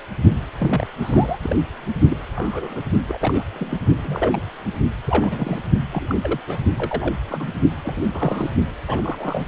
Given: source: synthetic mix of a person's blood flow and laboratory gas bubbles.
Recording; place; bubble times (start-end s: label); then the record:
Doppler ultrasound of blood flow; precordium
0.58-0.87 s: bubbles
1.02-1.37 s: bubbles
1.43-1.56 s: bubbles
2.09-2.17 s: bubbles
2.35-2.81 s: bubbles
3.08-3.44 s: bubbles
3.53-3.77 s: bubbles
4.02-4.42 s: bubbles
5.07-5.59 s: bubbles
5.92-6.16 s: bubbles
6.23-6.40 s: bubbles
6.47-6.58 s: bubbles
6.78-7.15 s: bubbles
7.28-7.50 s: bubbles
7.83-8.02 s: bubbles
8.13-8.50 s: bubbles
8.87-9.46 s: bubbles
From the record:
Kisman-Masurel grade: 232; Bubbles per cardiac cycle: several, 3 to 8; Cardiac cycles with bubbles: 50 to 99%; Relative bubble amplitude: moderate (0.250 to 0.450); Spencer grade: 3 (all of the cardiac periods contain showers or single bubble signals, but not dominating or overriding the cardiac motion signals); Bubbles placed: only in the low amplitude regions of the cardiac cycle